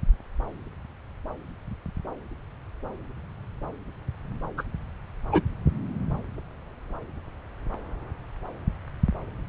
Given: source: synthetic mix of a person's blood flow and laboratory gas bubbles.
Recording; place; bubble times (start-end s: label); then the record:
Doppler ultrasound of blood flow; subclavian vein
4.58-4.63 s: bubbles
5.32-5.41 s: bubbles
From the record:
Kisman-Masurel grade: 113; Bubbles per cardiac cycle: 1 to 2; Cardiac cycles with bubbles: 1 to 10%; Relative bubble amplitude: loud (0.450 to 0.775); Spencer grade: 1 (occasional bubble signal discernible with the cardiac motion signal, with majority of cardiac periods free of bubbles); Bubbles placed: anywhere in the cardiac cycle